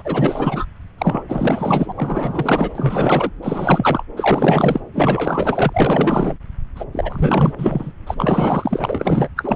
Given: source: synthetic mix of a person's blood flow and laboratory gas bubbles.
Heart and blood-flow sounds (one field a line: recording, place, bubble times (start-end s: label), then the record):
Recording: Doppler ultrasound of blood flow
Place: subclavian vein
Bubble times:
0.00-0.65 s: bubbles
0.98-1.23 s: bubbles
1.28-1.93 s: bubbles
1.96-2.72 s: bubbles
2.75-3.30 s: bubbles
3.42-4.03 s: bubbles
4.17-4.81 s: bubbles
4.94-6.38 s: bubbles
6.75-6.85 s: bubbles
6.92-7.54 s: bubbles
7.58-7.92 s: bubbles
8.06-8.14 s: bubbles
8.18-9.29 s: bubbles
9.36-9.56 s: bubbles
From the record:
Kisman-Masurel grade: 444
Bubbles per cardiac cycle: continuous sound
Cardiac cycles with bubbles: 100%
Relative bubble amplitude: maximal (0.775 to 0.999)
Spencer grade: 4 (maximum detectable bubble signal sounding continuously throughout systole and diastole of every cardiac period, and overriding the amplitude of the normal cardiac signals)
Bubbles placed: anywhere in the cardiac cycle